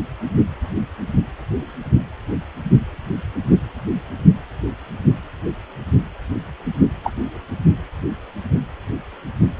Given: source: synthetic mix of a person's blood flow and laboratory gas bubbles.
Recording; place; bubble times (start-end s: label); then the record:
Doppler ultrasound of blood flow; precordium
7.04-7.12 s: bubbles
From the record:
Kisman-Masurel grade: 122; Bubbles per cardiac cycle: 1 to 2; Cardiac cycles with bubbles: 10 to 50%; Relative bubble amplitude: moderate (0.250 to 0.450); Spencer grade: 2 (many but less than half of the cardiac periods contain bubble signals, singularly or in groups); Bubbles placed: only in the low amplitude regions of the cardiac cycle